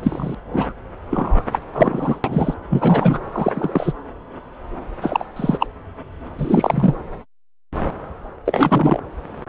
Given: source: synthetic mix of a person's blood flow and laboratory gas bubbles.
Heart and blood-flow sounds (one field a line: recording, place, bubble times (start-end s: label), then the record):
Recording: Doppler ultrasound of blood flow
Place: subclavian vein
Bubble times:
0.02-0.35 s: bubbles
0.52-0.73 s: bubbles
1.10-1.43 s: bubbles
1.51-1.59 s: bubbles
1.75-2.20 s: bubbles
2.24-2.54 s: bubbles
2.69-3.19 s: bubbles
3.32-3.93 s: bubbles
5.01-5.25 s: bubbles
5.36-5.67 s: bubbles
6.38-6.95 s: bubbles
8.46-9.00 s: bubbles
From the record:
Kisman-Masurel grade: 233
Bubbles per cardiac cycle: several, 3 to 8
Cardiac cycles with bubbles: 50 to 99%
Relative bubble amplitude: loud (0.450 to 0.775)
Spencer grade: 3 (all of the cardiac periods contain showers or single bubble signals, but not dominating or overriding the cardiac motion signals)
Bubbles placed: anywhere in the cardiac cycle